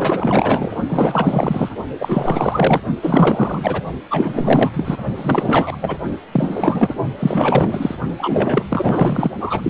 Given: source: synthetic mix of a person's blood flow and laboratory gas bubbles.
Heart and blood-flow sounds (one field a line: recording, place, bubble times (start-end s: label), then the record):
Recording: Doppler ultrasound of blood flow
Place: precordium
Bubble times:
0.00-0.76 s: bubbles
0.89-1.69 s: bubbles
1.99-2.80 s: bubbles
3.01-3.83 s: bubbles
4.10-4.71 s: bubbles
4.74-4.98 s: bubbles
5.16-5.77 s: bubbles
5.81-5.97 s: bubbles
6.32-6.96 s: bubbles
7.17-7.95 s: bubbles
8.17-8.64 s: bubbles
8.70-9.31 s: bubbles
9.40-9.69 s: bubbles
From the record:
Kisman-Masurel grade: 444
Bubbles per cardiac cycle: continuous sound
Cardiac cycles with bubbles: 100%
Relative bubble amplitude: maximal (0.775 to 0.999)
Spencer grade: 4 (maximum detectable bubble signal sounding continuously throughout systole and diastole of every cardiac period, and overriding the amplitude of the normal cardiac signals)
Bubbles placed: only in the low amplitude regions of the cardiac cycle